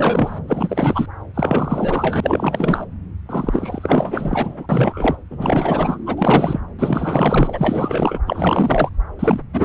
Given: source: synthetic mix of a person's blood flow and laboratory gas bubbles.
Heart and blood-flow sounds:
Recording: Doppler ultrasound of blood flow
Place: subclavian vein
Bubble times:
0.00-0.39 s: bubbles
0.47-1.06 s: bubbles
1.34-2.86 s: bubbles
3.29-4.67 s: bubbles
4.69-5.16 s: bubbles
5.31-5.98 s: bubbles
6.06-6.60 s: bubbles
6.79-8.20 s: bubbles
8.26-8.89 s: bubbles
9.19-9.40 s: bubbles
9.53-9.65 s: bubbles
From the record:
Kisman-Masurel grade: 444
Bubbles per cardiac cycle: continuous sound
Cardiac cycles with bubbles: 100%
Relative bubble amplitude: maximal (0.775 to 0.999)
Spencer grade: 4 (maximum detectable bubble signal sounding continuously throughout systole and diastole of every cardiac period, and overriding the amplitude of the normal cardiac signals)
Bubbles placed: anywhere in the cardiac cycle

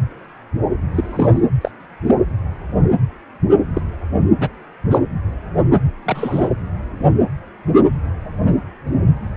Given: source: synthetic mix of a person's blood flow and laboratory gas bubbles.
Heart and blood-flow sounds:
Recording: Doppler ultrasound of blood flow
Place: precordium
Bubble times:
0.95-1.41 s: bubbles
1.61-1.71 s: bubbles
2.06-2.15 s: bubbles
3.74-3.81 s: bubbles
4.40-4.48 s: bubbles
4.91-4.98 s: bubbles
6.05-6.49 s: bubbles
7.75-7.81 s: bubbles
From the record:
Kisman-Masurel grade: 123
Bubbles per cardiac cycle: 1 to 2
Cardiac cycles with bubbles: 10 to 50%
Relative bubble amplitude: loud (0.450 to 0.775)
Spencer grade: 2 (many but less than half of the cardiac periods contain bubble signals, singularly or in groups)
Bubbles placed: anywhere in the cardiac cycle

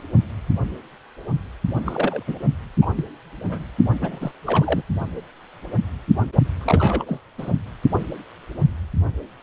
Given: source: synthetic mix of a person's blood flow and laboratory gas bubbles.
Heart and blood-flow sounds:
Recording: Doppler ultrasound of blood flow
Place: precordium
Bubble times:
1.85-2.23 s: bubbles
2.27-2.36 s: bubbles
2.81-2.85 s: bubbles
2.95-3.04 s: bubbles
3.45-3.65 s: bubbles
4.01-4.32 s: bubbles
4.46-4.82 s: bubbles
6.58-7.21 s: bubbles
7.38-7.50 s: bubbles
From the record:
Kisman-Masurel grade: 222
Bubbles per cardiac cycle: several, 3 to 8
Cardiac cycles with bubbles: 10 to 50%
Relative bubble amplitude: moderate (0.250 to 0.450)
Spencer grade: 2 (many but less than half of the cardiac periods contain bubble signals, singularly or in groups)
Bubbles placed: only in the low amplitude regions of the cardiac cycle

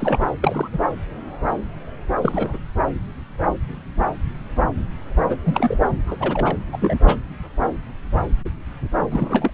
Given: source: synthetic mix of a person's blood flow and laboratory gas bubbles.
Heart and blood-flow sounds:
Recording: Doppler ultrasound of blood flow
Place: subclavian vein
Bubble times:
0.00-0.19 s: bubbles
0.41-0.67 s: bubbles
0.72-0.78 s: bubbles
2.21-2.58 s: bubbles
5.29-5.37 s: bubbles
5.43-5.77 s: bubbles
6.07-6.16 s: bubbles
6.20-6.57 s: bubbles
6.72-6.78 s: bubbles
6.80-6.97 s: bubbles
7.07-7.16 s: bubbles
9.11-9.51 s: bubbles
From the record:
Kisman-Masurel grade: 222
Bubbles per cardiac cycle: several, 3 to 8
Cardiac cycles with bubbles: 10 to 50%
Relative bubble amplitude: moderate (0.250 to 0.450)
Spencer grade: 2 (many but less than half of the cardiac periods contain bubble signals, singularly or in groups)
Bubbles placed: anywhere in the cardiac cycle

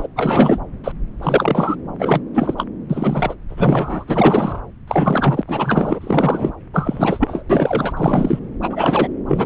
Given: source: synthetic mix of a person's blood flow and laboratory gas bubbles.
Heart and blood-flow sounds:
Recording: Doppler ultrasound of blood flow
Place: subclavian vein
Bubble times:
0.00-0.07 s: bubbles
0.16-0.59 s: bubbles
0.84-0.92 s: bubbles
1.22-1.76 s: bubbles
1.99-2.21 s: bubbles
2.33-2.54 s: bubbles
2.57-2.65 s: bubbles
2.89-3.34 s: bubbles
3.49-4.04 s: bubbles
4.07-4.60 s: bubbles
4.88-5.42 s: bubbles
5.47-6.52 s: bubbles
6.73-7.43 s: bubbles
7.50-7.92 s: bubbles
7.96-8.39 s: bubbles
8.62-9.08 s: bubbles
9.28-9.46 s: bubbles
From the record:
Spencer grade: 3 (all of the cardiac periods contain showers or single bubble signals, but not dominating or overriding the cardiac motion signals)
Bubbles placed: anywhere in the cardiac cycle

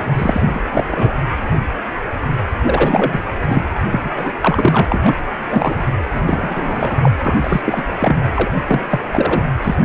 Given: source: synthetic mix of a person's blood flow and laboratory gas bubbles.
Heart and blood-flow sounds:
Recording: Doppler ultrasound of blood flow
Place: precordium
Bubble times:
0.15-0.60 s: bubbles
0.73-1.13 s: bubbles
2.66-3.22 s: bubbles
3.33-3.65 s: bubbles
3.91-4.09 s: bubbles
4.15-4.31 s: bubbles
4.41-5.25 s: bubbles
5.48-5.85 s: bubbles
6.12-6.23 s: bubbles
6.26-7.11 s: bubbles
7.25-7.35 s: bubbles
7.41-7.61 s: bubbles
7.65-7.83 s: bubbles
7.98-8.17 s: bubbles
8.35-8.53 s: bubbles
8.67-8.80 s: bubbles
8.91-9.01 s: bubbles
9.12-9.42 s: bubbles
9.62-9.75 s: bubbles
From the record:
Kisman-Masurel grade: 333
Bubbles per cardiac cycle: rolling drumbeat, 9 or more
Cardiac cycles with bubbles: 50 to 99%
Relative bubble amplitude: loud (0.450 to 0.775)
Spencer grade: 3 (all of the cardiac periods contain showers or single bubble signals, but not dominating or overriding the cardiac motion signals)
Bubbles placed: anywhere in the cardiac cycle

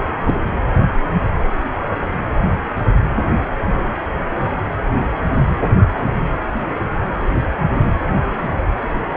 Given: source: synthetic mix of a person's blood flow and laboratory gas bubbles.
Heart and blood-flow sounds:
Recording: Doppler ultrasound of blood flow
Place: precordium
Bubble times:
0.26-0.34 s: bubbles
From the record:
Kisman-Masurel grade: 212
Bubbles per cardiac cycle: several, 3 to 8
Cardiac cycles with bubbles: 1 to 10%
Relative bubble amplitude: moderate (0.250 to 0.450)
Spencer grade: 1 (occasional bubble signal discernible with the cardiac motion signal, with majority of cardiac periods free of bubbles)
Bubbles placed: anywhere in the cardiac cycle

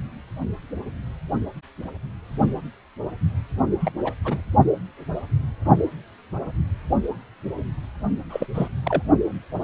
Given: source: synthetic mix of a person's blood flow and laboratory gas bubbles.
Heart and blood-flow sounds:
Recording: Doppler ultrasound of blood flow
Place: precordium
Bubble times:
3.80-3.91 s: bubbles
4.04-4.12 s: bubbles
4.25-4.41 s: bubbles
8.29-8.46 s: bubbles
8.54-8.68 s: bubbles
8.84-9.02 s: bubbles
From the record:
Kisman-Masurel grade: 222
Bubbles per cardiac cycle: several, 3 to 8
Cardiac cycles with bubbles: 10 to 50%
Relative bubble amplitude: moderate (0.250 to 0.450)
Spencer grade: 2 (many but less than half of the cardiac periods contain bubble signals, singularly or in groups)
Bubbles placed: only in the low amplitude regions of the cardiac cycle

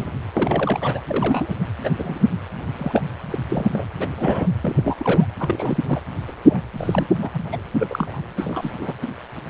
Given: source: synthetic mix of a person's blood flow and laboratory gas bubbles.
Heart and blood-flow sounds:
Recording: Doppler ultrasound of blood flow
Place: precordium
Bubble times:
0.00-0.10 s: bubbles
0.35-1.00 s: bubbles
1.07-1.55 s: bubbles
1.83-1.90 s: bubbles
1.97-2.29 s: bubbles
2.74-3.02 s: bubbles
3.31-3.38 s: bubbles
3.49-3.84 s: bubbles
4.00-4.07 s: bubbles
4.17-4.48 s: bubbles
4.63-5.25 s: bubbles
5.39-5.78 s: bubbles
5.84-6.00 s: bubbles
6.27-6.32 s: bubbles
6.44-6.63 s: bubbles
6.77-7.06 s: bubbles
7.21-7.30 s: bubbles
7.33-7.49 s: bubbles
7.51-7.58 s: bubbles
7.78-8.20 s: bubbles
8.37-8.94 s: bubbles
From the record:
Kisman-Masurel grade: 232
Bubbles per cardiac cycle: several, 3 to 8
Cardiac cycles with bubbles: 50 to 99%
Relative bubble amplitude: moderate (0.250 to 0.450)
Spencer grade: 3 (all of the cardiac periods contain showers or single bubble signals, but not dominating or overriding the cardiac motion signals)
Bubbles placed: anywhere in the cardiac cycle

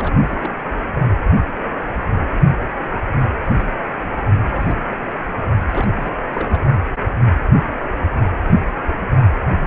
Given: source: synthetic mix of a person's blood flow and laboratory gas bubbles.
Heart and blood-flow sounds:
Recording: Doppler ultrasound of blood flow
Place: precordium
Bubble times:
0.00-0.12 s: bubbles
0.21-0.51 s: bubbles
0.88-1.12 s: bubbles
4.49-4.83 s: bubbles
4.91-4.96 s: bubbles
5.18-5.24 s: bubbles
5.70-5.89 s: bubbles
5.96-6.11 s: bubbles
6.33-6.60 s: bubbles
From the record:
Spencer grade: 2 (many but less than half of the cardiac periods contain bubble signals, singularly or in groups)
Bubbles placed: only in the low amplitude regions of the cardiac cycle

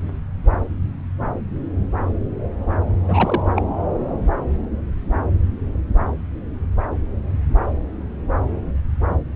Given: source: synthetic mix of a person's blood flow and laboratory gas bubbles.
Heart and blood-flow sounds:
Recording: Doppler ultrasound of blood flow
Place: subclavian vein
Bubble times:
3.08-3.42 s: bubbles
3.55-3.62 s: bubbles
From the record:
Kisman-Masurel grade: 212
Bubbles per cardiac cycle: several, 3 to 8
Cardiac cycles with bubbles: 1 to 10%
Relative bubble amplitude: moderate (0.250 to 0.450)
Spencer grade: 1 (occasional bubble signal discernible with the cardiac motion signal, with majority of cardiac periods free of bubbles)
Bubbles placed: anywhere in the cardiac cycle

